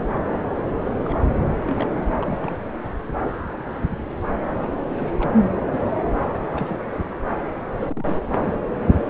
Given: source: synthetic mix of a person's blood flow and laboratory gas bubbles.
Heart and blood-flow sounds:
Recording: Doppler ultrasound of blood flow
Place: subclavian vein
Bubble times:
1.04-1.22 s: bubbles
1.26-1.41 s: bubbles
1.67-2.06 s: bubbles
2.19-2.57 s: bubbles
4.50-4.67 s: bubbles
4.89-5.31 s: bubbles
6.54-6.80 s: bubbles
6.91-7.05 s: bubbles
7.73-8.16 s: bubbles
8.28-8.36 s: bubbles
From the record:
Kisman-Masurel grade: 221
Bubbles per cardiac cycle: several, 3 to 8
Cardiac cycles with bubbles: 10 to 50%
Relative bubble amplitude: barely perceptible (0.100 to 0.250)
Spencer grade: 2 (many but less than half of the cardiac periods contain bubble signals, singularly or in groups)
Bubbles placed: anywhere in the cardiac cycle

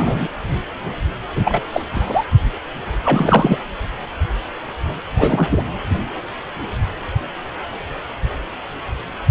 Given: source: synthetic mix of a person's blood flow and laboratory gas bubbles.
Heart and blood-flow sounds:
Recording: Doppler ultrasound of blood flow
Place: precordium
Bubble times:
0.00-0.28 s: bubbles
1.35-1.61 s: bubbles
1.72-1.82 s: bubbles
1.91-2.25 s: bubbles
3.04-3.58 s: bubbles
5.17-5.65 s: bubbles
From the record:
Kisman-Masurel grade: 223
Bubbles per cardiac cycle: several, 3 to 8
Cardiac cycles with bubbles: 10 to 50%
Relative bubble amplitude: loud (0.450 to 0.775)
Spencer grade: 2 (many but less than half of the cardiac periods contain bubble signals, singularly or in groups)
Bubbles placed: anywhere in the cardiac cycle

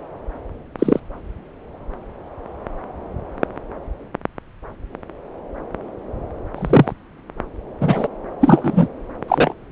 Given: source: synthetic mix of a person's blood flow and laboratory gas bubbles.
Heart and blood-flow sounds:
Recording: Doppler ultrasound of blood flow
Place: subclavian vein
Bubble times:
0.79-0.99 s: bubbles
6.55-6.93 s: bubbles
7.80-8.07 s: bubbles
8.40-8.88 s: bubbles
9.28-9.53 s: bubbles
From the record:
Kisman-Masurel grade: 123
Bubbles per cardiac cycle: 1 to 2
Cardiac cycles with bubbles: 10 to 50%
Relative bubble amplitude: loud (0.450 to 0.775)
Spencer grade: 2 (many but less than half of the cardiac periods contain bubble signals, singularly or in groups)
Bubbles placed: anywhere in the cardiac cycle

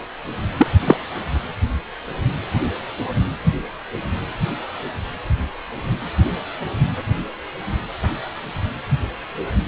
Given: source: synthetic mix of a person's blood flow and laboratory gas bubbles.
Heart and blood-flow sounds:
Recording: Doppler ultrasound of blood flow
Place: precordium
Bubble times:
0.58-0.67 s: bubbles
0.85-0.96 s: bubbles
From the record:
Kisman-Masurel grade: 113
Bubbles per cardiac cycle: 1 to 2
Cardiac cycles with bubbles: 1 to 10%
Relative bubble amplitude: loud (0.450 to 0.775)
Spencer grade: 1 (occasional bubble signal discernible with the cardiac motion signal, with majority of cardiac periods free of bubbles)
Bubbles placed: anywhere in the cardiac cycle

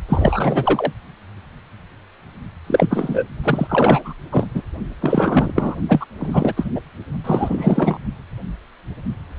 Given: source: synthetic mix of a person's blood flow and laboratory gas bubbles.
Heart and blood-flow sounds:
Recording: Doppler ultrasound of blood flow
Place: precordium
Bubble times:
0.09-0.92 s: bubbles
2.67-3.25 s: bubbles
3.44-4.13 s: bubbles
4.32-4.46 s: bubbles
4.54-4.62 s: bubbles
5.01-5.53 s: bubbles
5.55-5.75 s: bubbles
5.88-6.05 s: bubbles
6.19-6.54 s: bubbles
6.57-6.70 s: bubbles
6.75-6.81 s: bubbles
7.24-7.98 s: bubbles
From the record:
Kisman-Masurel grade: 333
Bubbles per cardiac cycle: rolling drumbeat, 9 or more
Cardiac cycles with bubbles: 50 to 99%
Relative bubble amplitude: loud (0.450 to 0.775)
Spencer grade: 3 (all of the cardiac periods contain showers or single bubble signals, but not dominating or overriding the cardiac motion signals)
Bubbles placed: only in the low amplitude regions of the cardiac cycle

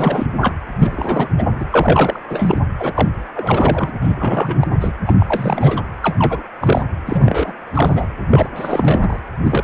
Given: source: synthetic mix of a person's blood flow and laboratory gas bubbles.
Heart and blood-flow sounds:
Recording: Doppler ultrasound of blood flow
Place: precordium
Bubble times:
0.00-0.27 s: bubbles
0.41-0.54 s: bubbles
0.78-1.29 s: bubbles
1.38-1.47 s: bubbles
1.59-1.66 s: bubbles
1.72-2.19 s: bubbles
2.29-2.58 s: bubbles
2.79-3.08 s: bubbles
3.35-3.91 s: bubbles
4.01-4.13 s: bubbles
4.16-4.67 s: bubbles
4.73-4.92 s: bubbles
5.07-5.15 s: bubbles
5.20-5.83 s: bubbles
6.02-6.42 s: bubbles
6.61-6.83 s: bubbles
7.06-7.53 s: bubbles
7.74-8.06 s: bubbles
8.30-8.49 s: bubbles
8.55-9.19 s: bubbles
9.44-9.63 s: bubbles
From the record:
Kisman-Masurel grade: 342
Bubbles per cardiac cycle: rolling drumbeat, 9 or more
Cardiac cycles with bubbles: 100%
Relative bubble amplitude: moderate (0.250 to 0.450)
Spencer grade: 3 (all of the cardiac periods contain showers or single bubble signals, but not dominating or overriding the cardiac motion signals)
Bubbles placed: anywhere in the cardiac cycle

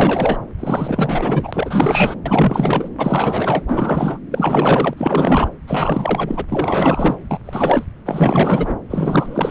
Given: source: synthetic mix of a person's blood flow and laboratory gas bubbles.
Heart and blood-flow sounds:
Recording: Doppler ultrasound of blood flow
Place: subclavian vein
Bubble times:
0.00-0.39 s: bubbles
0.58-2.15 s: bubbles
2.25-2.89 s: bubbles
2.98-3.64 s: bubbles
3.69-4.19 s: bubbles
4.31-4.94 s: bubbles
4.97-5.50 s: bubbles
5.67-6.45 s: bubbles
6.49-7.15 s: bubbles
7.30-7.41 s: bubbles
7.44-7.85 s: bubbles
8.05-8.76 s: bubbles
8.90-9.51 s: bubbles
From the record:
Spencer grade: 4 (maximum detectable bubble signal sounding continuously throughout systole and diastole of every cardiac period, and overriding the amplitude of the normal cardiac signals)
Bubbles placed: anywhere in the cardiac cycle

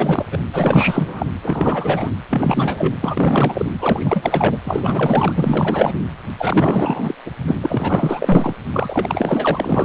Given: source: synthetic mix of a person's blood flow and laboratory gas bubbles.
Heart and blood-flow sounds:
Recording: Doppler ultrasound of blood flow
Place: precordium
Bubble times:
0.00-0.26 s: bubbles
0.31-0.38 s: bubbles
0.53-1.26 s: bubbles
1.43-2.10 s: bubbles
2.30-2.94 s: bubbles
3.01-3.66 s: bubbles
3.79-4.57 s: bubbles
4.64-5.92 s: bubbles
6.38-7.15 s: bubbles
7.25-7.31 s: bubbles
7.47-7.55 s: bubbles
7.62-8.54 s: bubbles
8.73-9.85 s: bubbles
From the record:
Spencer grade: 4 (maximum detectable bubble signal sounding continuously throughout systole and diastole of every cardiac period, and overriding the amplitude of the normal cardiac signals)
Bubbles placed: anywhere in the cardiac cycle

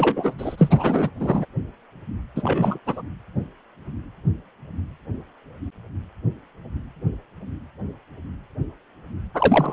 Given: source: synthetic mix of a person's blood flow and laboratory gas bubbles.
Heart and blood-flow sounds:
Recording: Doppler ultrasound of blood flow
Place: precordium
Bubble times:
0.00-0.34 s: bubbles
0.38-1.10 s: bubbles
1.19-1.46 s: bubbles
2.35-2.79 s: bubbles
2.86-3.02 s: bubbles
9.34-9.73 s: bubbles
From the record:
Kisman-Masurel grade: 223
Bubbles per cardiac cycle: several, 3 to 8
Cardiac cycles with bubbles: 10 to 50%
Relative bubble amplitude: loud (0.450 to 0.775)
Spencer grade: 2 (many but less than half of the cardiac periods contain bubble signals, singularly or in groups)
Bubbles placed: anywhere in the cardiac cycle

